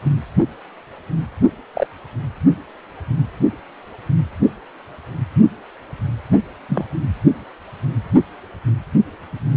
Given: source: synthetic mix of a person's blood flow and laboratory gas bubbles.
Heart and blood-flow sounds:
Doppler ultrasound of blood flow; precordium
1.73-1.87 s: bubbles
6.69-6.84 s: bubbles
From the record:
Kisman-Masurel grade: 122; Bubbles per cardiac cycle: 1 to 2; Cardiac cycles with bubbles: 10 to 50%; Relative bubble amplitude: moderate (0.250 to 0.450); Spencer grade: 2 (many but less than half of the cardiac periods contain bubble signals, singularly or in groups); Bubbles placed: anywhere in the cardiac cycle

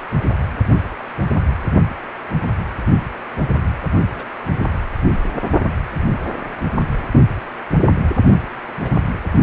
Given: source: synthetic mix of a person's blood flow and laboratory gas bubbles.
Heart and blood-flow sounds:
Doppler ultrasound of blood flow; precordium
4.13-4.29 s: bubbles
4.61-4.70 s: bubbles
8.83-8.91 s: bubbles
From the record:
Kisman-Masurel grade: 121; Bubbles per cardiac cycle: 1 to 2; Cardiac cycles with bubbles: 10 to 50%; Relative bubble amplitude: barely perceptible (0.100 to 0.250); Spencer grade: 2 (many but less than half of the cardiac periods contain bubble signals, singularly or in groups); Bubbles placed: only in the low amplitude regions of the cardiac cycle

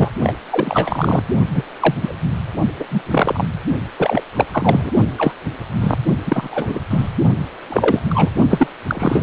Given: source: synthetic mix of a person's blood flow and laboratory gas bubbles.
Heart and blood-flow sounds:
Doppler ultrasound of blood flow; precordium
0.00-0.11 s: bubbles
0.23-0.34 s: bubbles
0.50-1.23 s: bubbles
1.54-1.64 s: bubbles
1.80-1.95 s: bubbles
2.01-2.15 s: bubbles
2.79-2.85 s: bubbles
2.91-3.02 s: bubbles
3.10-3.45 s: bubbles
3.97-4.22 s: bubbles
4.36-4.46 s: bubbles
4.51-4.92 s: bubbles
5.17-5.33 s: bubbles
5.80-5.96 s: bubbles
6.26-6.49 s: bubbles
6.51-6.79 s: bubbles
6.89-7.10 s: bubbles
7.69-8.02 s: bubbles
8.09-8.29 s: bubbles
8.50-8.67 s: bubbles
8.87-9.23 s: bubbles
From the record:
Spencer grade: 3 (all of the cardiac periods contain showers or single bubble signals, but not dominating or overriding the cardiac motion signals); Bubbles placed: only in the low amplitude regions of the cardiac cycle

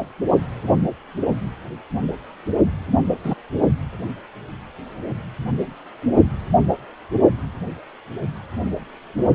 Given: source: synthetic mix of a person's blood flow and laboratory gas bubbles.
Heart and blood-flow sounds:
Doppler ultrasound of blood flow; precordium
3.24-3.34 s: bubbles
From the record:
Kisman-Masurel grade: 113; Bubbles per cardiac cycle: 1 to 2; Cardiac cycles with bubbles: 1 to 10%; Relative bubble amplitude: loud (0.450 to 0.775); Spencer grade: 1 (occasional bubble signal discernible with the cardiac motion signal, with majority of cardiac periods free of bubbles); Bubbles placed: only in the low amplitude regions of the cardiac cycle

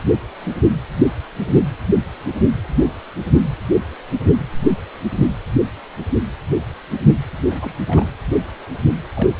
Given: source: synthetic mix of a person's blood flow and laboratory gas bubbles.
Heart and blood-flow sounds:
Doppler ultrasound of blood flow; precordium
7.46-7.74 s: bubbles
7.87-8.11 s: bubbles
9.14-9.29 s: bubbles
From the record:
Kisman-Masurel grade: 221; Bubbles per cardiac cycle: several, 3 to 8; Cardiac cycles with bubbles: 10 to 50%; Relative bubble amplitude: barely perceptible (0.100 to 0.250); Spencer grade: 2 (many but less than half of the cardiac periods contain bubble signals, singularly or in groups); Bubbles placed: anywhere in the cardiac cycle

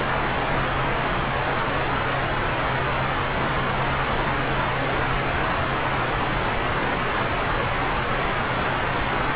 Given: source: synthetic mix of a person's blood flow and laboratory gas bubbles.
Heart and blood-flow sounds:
Doppler ultrasound of blood flow; subclavian vein
0.00-0.04 s: bubbles
From the record:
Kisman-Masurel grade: 211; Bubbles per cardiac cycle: several, 3 to 8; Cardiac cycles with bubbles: 1 to 10%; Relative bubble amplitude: barely perceptible (0.100 to 0.250); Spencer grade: 1 (occasional bubble signal discernible with the cardiac motion signal, with majority of cardiac periods free of bubbles); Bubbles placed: anywhere in the cardiac cycle

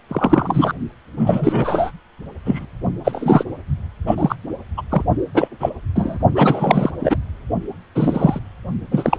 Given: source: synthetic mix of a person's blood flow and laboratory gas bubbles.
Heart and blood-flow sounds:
Doppler ultrasound of blood flow; precordium
0.09-0.73 s: bubbles
1.17-1.91 s: bubbles
2.45-2.66 s: bubbles
3.04-3.44 s: bubbles
4.06-4.35 s: bubbles
4.77-4.82 s: bubbles
4.89-5.04 s: bubbles
5.34-5.48 s: bubbles
5.60-5.70 s: bubbles
5.96-6.17 s: bubbles
6.34-6.91 s: bubbles
7.00-7.17 s: bubbles
7.95-8.39 s: bubbles
8.91-9.18 s: bubbles
From the record:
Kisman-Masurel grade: 243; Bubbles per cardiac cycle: several, 3 to 8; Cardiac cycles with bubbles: 100%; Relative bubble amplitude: loud (0.450 to 0.775); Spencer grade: 3 (all of the cardiac periods contain showers or single bubble signals, but not dominating or overriding the cardiac motion signals); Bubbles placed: only in the low amplitude regions of the cardiac cycle

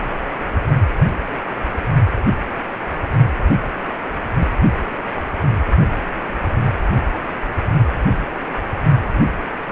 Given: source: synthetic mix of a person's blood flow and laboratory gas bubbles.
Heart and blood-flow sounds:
Doppler ultrasound of blood flow; precordium
no bubbles
From the record:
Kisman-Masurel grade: 000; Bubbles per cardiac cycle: 0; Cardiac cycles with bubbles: 0%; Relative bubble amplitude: no bubbles discernible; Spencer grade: 0 (complete lack of bubble signals)

